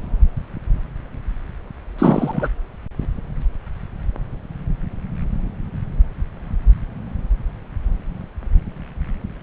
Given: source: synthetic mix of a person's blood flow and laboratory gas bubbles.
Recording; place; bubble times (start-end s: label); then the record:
Doppler ultrasound of blood flow; subclavian vein
1.98-2.48 s: bubbles
From the record:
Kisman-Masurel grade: 213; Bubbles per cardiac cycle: several, 3 to 8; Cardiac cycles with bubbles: 1 to 10%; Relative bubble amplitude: loud (0.450 to 0.775); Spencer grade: 1 (occasional bubble signal discernible with the cardiac motion signal, with majority of cardiac periods free of bubbles); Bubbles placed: anywhere in the cardiac cycle